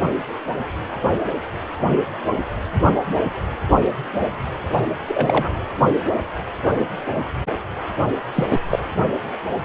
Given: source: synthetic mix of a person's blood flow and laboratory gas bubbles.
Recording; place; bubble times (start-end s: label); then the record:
Doppler ultrasound of blood flow; precordium
5.08-5.53 s: bubbles
8.35-8.46 s: bubbles
8.50-8.60 s: bubbles
8.70-8.79 s: bubbles
From the record:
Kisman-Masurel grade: 222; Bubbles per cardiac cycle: several, 3 to 8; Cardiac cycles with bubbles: 10 to 50%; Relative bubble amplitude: moderate (0.250 to 0.450); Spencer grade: 2 (many but less than half of the cardiac periods contain bubble signals, singularly or in groups); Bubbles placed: only in the low amplitude regions of the cardiac cycle